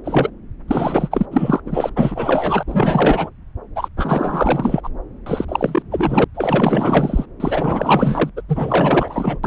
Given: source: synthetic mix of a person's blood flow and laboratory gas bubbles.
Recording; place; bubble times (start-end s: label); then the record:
Doppler ultrasound of blood flow; subclavian vein
0.04-0.31 s: bubbles
0.68-1.26 s: bubbles
1.31-1.60 s: bubbles
1.66-1.90 s: bubbles
1.96-2.63 s: bubbles
2.67-3.29 s: bubbles
3.75-3.88 s: bubbles
3.97-4.89 s: bubbles
5.26-5.45 s: bubbles
5.48-5.83 s: bubbles
5.91-6.25 s: bubbles
6.34-7.26 s: bubbles
7.40-8.29 s: bubbles
8.37-8.42 s: bubbles
8.49-9.39 s: bubbles
9.44-9.47 s: bubbles
From the record:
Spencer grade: 4 (maximum detectable bubble signal sounding continuously throughout systole and diastole of every cardiac period, and overriding the amplitude of the normal cardiac signals); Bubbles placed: anywhere in the cardiac cycle